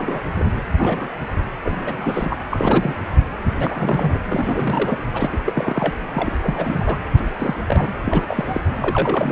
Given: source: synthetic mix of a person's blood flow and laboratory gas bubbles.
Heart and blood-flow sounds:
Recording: Doppler ultrasound of blood flow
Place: precordium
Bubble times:
0.00-0.20 s: bubbles
0.33-0.45 s: bubbles
0.78-1.08 s: bubbles
1.19-1.26 s: bubbles
1.65-2.38 s: bubbles
2.51-2.96 s: bubbles
3.57-4.18 s: bubbles
4.29-5.04 s: bubbles
5.13-5.38 s: bubbles
5.45-5.93 s: bubbles
6.13-6.33 s: bubbles
6.43-6.98 s: bubbles
7.17-7.20 s: bubbles
7.38-7.58 s: bubbles
7.68-7.90 s: bubbles
8.05-8.61 s: bubbles
8.81-9.32 s: bubbles
From the record:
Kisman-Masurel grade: 342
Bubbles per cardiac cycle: rolling drumbeat, 9 or more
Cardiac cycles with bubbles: 100%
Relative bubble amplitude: moderate (0.250 to 0.450)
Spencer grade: 3 (all of the cardiac periods contain showers or single bubble signals, but not dominating or overriding the cardiac motion signals)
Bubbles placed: anywhere in the cardiac cycle

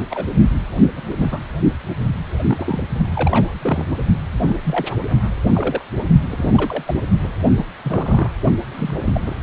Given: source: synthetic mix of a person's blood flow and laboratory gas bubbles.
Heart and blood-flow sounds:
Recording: Doppler ultrasound of blood flow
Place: precordium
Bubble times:
0.10-0.25 s: bubbles
0.96-1.03 s: bubbles
1.09-1.18 s: bubbles
1.20-1.42 s: bubbles
2.48-2.83 s: bubbles
3.14-3.88 s: bubbles
4.40-4.56 s: bubbles
4.64-4.96 s: bubbles
5.47-5.82 s: bubbles
6.30-6.83 s: bubbles
6.86-6.94 s: bubbles
7.23-7.28 s: bubbles
7.56-7.65 s: bubbles
7.84-8.30 s: bubbles
8.71-9.00 s: bubbles
9.05-9.21 s: bubbles
9.27-9.36 s: bubbles
From the record:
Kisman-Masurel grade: 232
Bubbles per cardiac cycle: several, 3 to 8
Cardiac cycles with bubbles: 50 to 99%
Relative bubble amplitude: moderate (0.250 to 0.450)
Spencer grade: 3 (all of the cardiac periods contain showers or single bubble signals, but not dominating or overriding the cardiac motion signals)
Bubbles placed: only in the low amplitude regions of the cardiac cycle

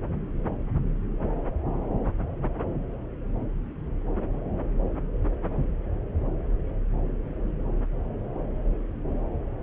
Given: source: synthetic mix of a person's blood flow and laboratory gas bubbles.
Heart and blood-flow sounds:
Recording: Doppler ultrasound of blood flow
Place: subclavian vein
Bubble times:
no bubbles
From the record:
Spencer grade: 0 (complete lack of bubble signals)

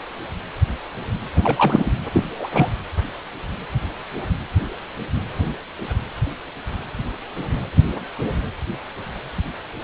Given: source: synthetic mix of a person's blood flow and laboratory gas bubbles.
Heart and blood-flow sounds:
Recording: Doppler ultrasound of blood flow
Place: precordium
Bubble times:
1.35-1.92 s: bubbles
2.12-2.24 s: bubbles
2.38-2.70 s: bubbles
From the record:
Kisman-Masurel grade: 222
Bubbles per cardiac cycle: several, 3 to 8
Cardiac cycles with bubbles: 10 to 50%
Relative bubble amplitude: moderate (0.250 to 0.450)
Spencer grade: 2 (many but less than half of the cardiac periods contain bubble signals, singularly or in groups)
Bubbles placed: anywhere in the cardiac cycle

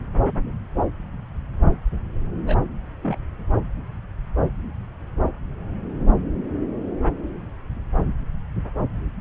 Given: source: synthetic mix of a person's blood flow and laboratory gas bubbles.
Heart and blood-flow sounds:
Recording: Doppler ultrasound of blood flow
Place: subclavian vein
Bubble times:
2.46-2.56 s: bubbles
3.02-3.17 s: bubbles
From the record:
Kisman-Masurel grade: 111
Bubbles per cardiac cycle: 1 to 2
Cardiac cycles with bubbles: 1 to 10%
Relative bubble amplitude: barely perceptible (0.100 to 0.250)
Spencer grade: 1 (occasional bubble signal discernible with the cardiac motion signal, with majority of cardiac periods free of bubbles)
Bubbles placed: anywhere in the cardiac cycle

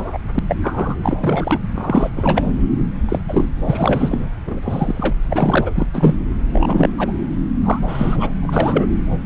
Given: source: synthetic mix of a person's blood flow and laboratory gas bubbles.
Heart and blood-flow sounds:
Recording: Doppler ultrasound of blood flow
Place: subclavian vein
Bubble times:
0.00-0.19 s: bubbles
0.34-0.39 s: bubbles
0.48-0.56 s: bubbles
0.61-0.96 s: bubbles
1.03-1.59 s: bubbles
1.74-2.09 s: bubbles
2.16-2.54 s: bubbles
3.08-3.20 s: bubbles
3.28-3.49 s: bubbles
3.65-4.28 s: bubbles
4.46-4.60 s: bubbles
4.62-5.16 s: bubbles
5.25-5.71 s: bubbles
5.75-5.88 s: bubbles
5.94-6.17 s: bubbles
6.50-6.90 s: bubbles
6.98-7.12 s: bubbles
7.64-7.79 s: bubbles
7.88-8.36 s: bubbles
8.42-8.86 s: bubbles
From the record:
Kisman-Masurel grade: 243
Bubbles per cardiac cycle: several, 3 to 8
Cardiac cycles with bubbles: 100%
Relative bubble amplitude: loud (0.450 to 0.775)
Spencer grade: 3 (all of the cardiac periods contain showers or single bubble signals, but not dominating or overriding the cardiac motion signals)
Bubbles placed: anywhere in the cardiac cycle

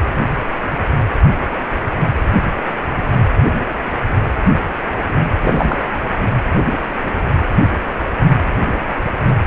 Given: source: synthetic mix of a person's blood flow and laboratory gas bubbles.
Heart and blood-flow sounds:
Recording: Doppler ultrasound of blood flow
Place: precordium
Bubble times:
5.40-5.79 s: bubbles
From the record:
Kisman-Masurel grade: 113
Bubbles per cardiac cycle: 1 to 2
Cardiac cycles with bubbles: 1 to 10%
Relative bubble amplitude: loud (0.450 to 0.775)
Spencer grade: 1 (occasional bubble signal discernible with the cardiac motion signal, with majority of cardiac periods free of bubbles)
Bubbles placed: anywhere in the cardiac cycle

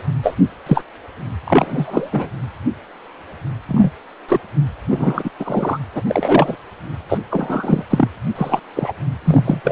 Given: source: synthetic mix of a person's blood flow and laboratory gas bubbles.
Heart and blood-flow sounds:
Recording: Doppler ultrasound of blood flow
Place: precordium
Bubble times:
0.23-0.35 s: bubbles
0.66-0.83 s: bubbles
1.44-2.29 s: bubbles
3.68-3.91 s: bubbles
4.29-4.41 s: bubbles
4.88-5.30 s: bubbles
5.40-5.78 s: bubbles
5.95-6.03 s: bubbles
6.07-6.57 s: bubbles
7.08-7.19 s: bubbles
7.30-7.83 s: bubbles
7.90-8.08 s: bubbles
8.35-8.59 s: bubbles
8.75-8.93 s: bubbles
9.24-9.60 s: bubbles
9.63-9.72 s: bubbles
From the record:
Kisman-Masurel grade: 233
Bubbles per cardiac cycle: several, 3 to 8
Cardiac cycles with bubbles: 50 to 99%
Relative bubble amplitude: loud (0.450 to 0.775)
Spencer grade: 3 (all of the cardiac periods contain showers or single bubble signals, but not dominating or overriding the cardiac motion signals)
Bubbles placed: anywhere in the cardiac cycle

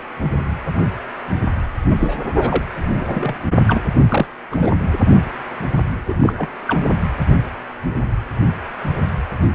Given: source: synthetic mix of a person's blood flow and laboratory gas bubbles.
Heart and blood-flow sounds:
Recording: Doppler ultrasound of blood flow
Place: precordium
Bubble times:
1.87-2.19 s: bubbles
2.35-2.65 s: bubbles
2.94-3.35 s: bubbles
3.68-3.81 s: bubbles
3.99-4.28 s: bubbles
4.50-4.71 s: bubbles
6.08-6.49 s: bubbles
6.67-6.91 s: bubbles
9.41-9.47 s: bubbles
From the record:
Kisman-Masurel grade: 232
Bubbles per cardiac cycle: several, 3 to 8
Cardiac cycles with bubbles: 50 to 99%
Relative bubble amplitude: moderate (0.250 to 0.450)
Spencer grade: 3 (all of the cardiac periods contain showers or single bubble signals, but not dominating or overriding the cardiac motion signals)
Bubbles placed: anywhere in the cardiac cycle

